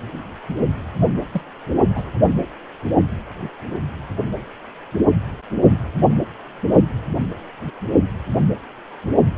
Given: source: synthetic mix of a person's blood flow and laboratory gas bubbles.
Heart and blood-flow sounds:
Doppler ultrasound of blood flow; precordium
1.31-1.42 s: bubbles
1.95-2.04 s: bubbles
From the record:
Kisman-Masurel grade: 112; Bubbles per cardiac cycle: 1 to 2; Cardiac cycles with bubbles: 1 to 10%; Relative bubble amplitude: moderate (0.250 to 0.450); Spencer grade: 1 (occasional bubble signal discernible with the cardiac motion signal, with majority of cardiac periods free of bubbles); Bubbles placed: only in the low amplitude regions of the cardiac cycle

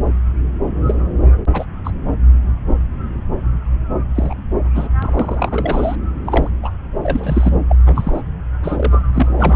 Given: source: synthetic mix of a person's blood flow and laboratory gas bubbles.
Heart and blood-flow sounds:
Doppler ultrasound of blood flow; subclavian vein
0.86-0.95 s: bubbles
1.53-1.65 s: bubbles
1.84-1.91 s: bubbles
4.14-4.35 s: bubbles
4.75-4.89 s: bubbles
5.02-5.96 s: bubbles
6.24-6.49 s: bubbles
6.62-6.71 s: bubbles
7.03-7.58 s: bubbles
7.69-7.76 s: bubbles
7.84-8.21 s: bubbles
8.62-9.02 s: bubbles
9.13-9.56 s: bubbles
From the record:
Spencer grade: 3 (all of the cardiac periods contain showers or single bubble signals, but not dominating or overriding the cardiac motion signals); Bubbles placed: anywhere in the cardiac cycle

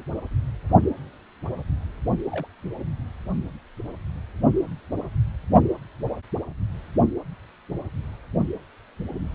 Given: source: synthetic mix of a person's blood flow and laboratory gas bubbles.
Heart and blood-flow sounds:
Doppler ultrasound of blood flow; precordium
2.30-2.46 s: bubbles
From the record:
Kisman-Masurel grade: 111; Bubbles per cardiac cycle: 1 to 2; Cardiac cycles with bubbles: 1 to 10%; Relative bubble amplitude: barely perceptible (0.100 to 0.250); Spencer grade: 1 (occasional bubble signal discernible with the cardiac motion signal, with majority of cardiac periods free of bubbles); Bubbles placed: only in the low amplitude regions of the cardiac cycle

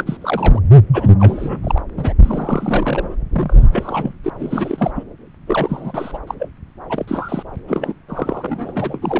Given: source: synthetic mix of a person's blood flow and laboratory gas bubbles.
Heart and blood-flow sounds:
Doppler ultrasound of blood flow; subclavian vein
0.00-0.17 s: bubbles
0.21-0.60 s: bubbles
0.93-1.09 s: bubbles
1.19-1.82 s: bubbles
1.97-2.13 s: bubbles
2.23-3.15 s: bubbles
3.32-3.69 s: bubbles
3.71-4.15 s: bubbles
4.24-4.30 s: bubbles
4.38-4.91 s: bubbles
4.95-5.04 s: bubbles
5.46-6.19 s: bubbles
6.27-6.34 s: bubbles
6.38-6.49 s: bubbles
6.89-7.43 s: bubbles
7.67-7.93 s: bubbles
8.09-8.99 s: bubbles
9.02-9.20 s: bubbles
From the record:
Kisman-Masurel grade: 342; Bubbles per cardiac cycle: rolling drumbeat, 9 or more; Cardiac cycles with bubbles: 100%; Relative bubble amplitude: moderate (0.250 to 0.450); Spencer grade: 3 (all of the cardiac periods contain showers or single bubble signals, but not dominating or overriding the cardiac motion signals); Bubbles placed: anywhere in the cardiac cycle

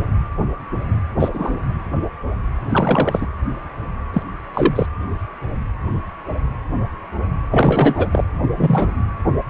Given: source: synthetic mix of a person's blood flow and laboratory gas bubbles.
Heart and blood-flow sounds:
Doppler ultrasound of blood flow; precordium
1.19-1.29 s: bubbles
1.33-1.56 s: bubbles
2.69-3.27 s: bubbles
4.13-4.22 s: bubbles
4.54-4.86 s: bubbles
7.50-8.09 s: bubbles
8.12-8.24 s: bubbles
8.57-9.01 s: bubbles
From the record:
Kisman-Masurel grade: 223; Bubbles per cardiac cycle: several, 3 to 8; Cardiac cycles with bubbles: 10 to 50%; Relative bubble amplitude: loud (0.450 to 0.775); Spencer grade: 2 (many but less than half of the cardiac periods contain bubble signals, singularly or in groups); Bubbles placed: anywhere in the cardiac cycle

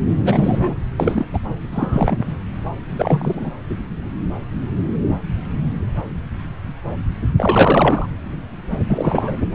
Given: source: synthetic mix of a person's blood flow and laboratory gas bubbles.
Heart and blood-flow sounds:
Doppler ultrasound of blood flow; subclavian vein
0.23-0.75 s: bubbles
0.97-1.27 s: bubbles
1.33-1.39 s: bubbles
1.71-2.23 s: bubbles
2.90-3.50 s: bubbles
3.69-3.75 s: bubbles
7.38-8.07 s: bubbles
8.88-9.37 s: bubbles
From the record:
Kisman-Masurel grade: 223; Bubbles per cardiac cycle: several, 3 to 8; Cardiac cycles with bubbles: 10 to 50%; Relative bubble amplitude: loud (0.450 to 0.775); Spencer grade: 2 (many but less than half of the cardiac periods contain bubble signals, singularly or in groups); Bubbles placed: anywhere in the cardiac cycle

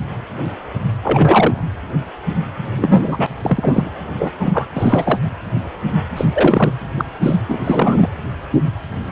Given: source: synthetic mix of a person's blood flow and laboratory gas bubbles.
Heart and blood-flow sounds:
Doppler ultrasound of blood flow; precordium
1.02-1.63 s: bubbles
2.78-3.26 s: bubbles
3.42-3.90 s: bubbles
4.19-4.31 s: bubbles
4.38-4.67 s: bubbles
4.75-5.21 s: bubbles
6.17-6.71 s: bubbles
6.96-7.04 s: bubbles
7.22-7.36 s: bubbles
7.48-7.59 s: bubbles
7.64-8.08 s: bubbles
From the record:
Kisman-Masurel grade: 233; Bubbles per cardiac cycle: several, 3 to 8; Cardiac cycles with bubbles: 50 to 99%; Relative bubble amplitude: loud (0.450 to 0.775); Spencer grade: 3 (all of the cardiac periods contain showers or single bubble signals, but not dominating or overriding the cardiac motion signals); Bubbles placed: anywhere in the cardiac cycle

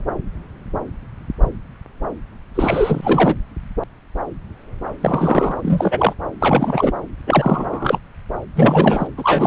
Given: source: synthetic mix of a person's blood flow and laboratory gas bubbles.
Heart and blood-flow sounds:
Doppler ultrasound of blood flow; subclavian vein
2.54-3.35 s: bubbles
5.01-6.13 s: bubbles
6.40-6.92 s: bubbles
7.27-7.99 s: bubbles
8.55-9.07 s: bubbles
9.17-9.47 s: bubbles
From the record:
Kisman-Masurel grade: 333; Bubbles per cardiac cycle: rolling drumbeat, 9 or more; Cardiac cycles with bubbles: 50 to 99%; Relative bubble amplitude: loud (0.450 to 0.775); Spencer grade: 3 (all of the cardiac periods contain showers or single bubble signals, but not dominating or overriding the cardiac motion signals); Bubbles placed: anywhere in the cardiac cycle

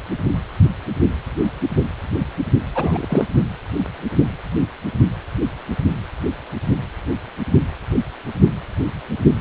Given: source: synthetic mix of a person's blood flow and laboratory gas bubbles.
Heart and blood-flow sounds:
Doppler ultrasound of blood flow; precordium
2.75-3.25 s: bubbles
From the record:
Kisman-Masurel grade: 212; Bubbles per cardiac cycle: several, 3 to 8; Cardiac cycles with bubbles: 1 to 10%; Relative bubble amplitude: moderate (0.250 to 0.450); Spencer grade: 1 (occasional bubble signal discernible with the cardiac motion signal, with majority of cardiac periods free of bubbles); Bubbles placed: only in the low amplitude regions of the cardiac cycle

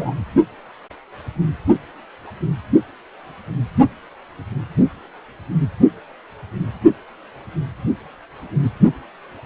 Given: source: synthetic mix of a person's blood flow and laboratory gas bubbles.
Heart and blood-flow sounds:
Doppler ultrasound of blood flow; precordium
0.00-0.14 s: bubbles
From the record:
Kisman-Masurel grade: 222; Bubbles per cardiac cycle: several, 3 to 8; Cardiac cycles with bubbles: 10 to 50%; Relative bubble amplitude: moderate (0.250 to 0.450); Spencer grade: 2 (many but less than half of the cardiac periods contain bubble signals, singularly or in groups); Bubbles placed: only in the low amplitude regions of the cardiac cycle

